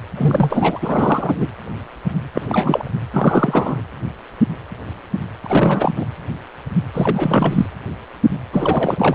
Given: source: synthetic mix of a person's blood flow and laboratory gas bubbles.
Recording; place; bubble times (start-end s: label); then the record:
Doppler ultrasound of blood flow; precordium
0.15-1.48 s: bubbles
2.33-2.89 s: bubbles
3.12-3.82 s: bubbles
5.44-5.92 s: bubbles
5.96-6.06 s: bubbles
6.94-7.66 s: bubbles
8.52-9.15 s: bubbles
From the record:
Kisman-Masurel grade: 333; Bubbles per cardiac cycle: rolling drumbeat, 9 or more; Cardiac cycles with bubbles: 50 to 99%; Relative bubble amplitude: loud (0.450 to 0.775); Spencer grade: 3 (all of the cardiac periods contain showers or single bubble signals, but not dominating or overriding the cardiac motion signals); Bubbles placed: anywhere in the cardiac cycle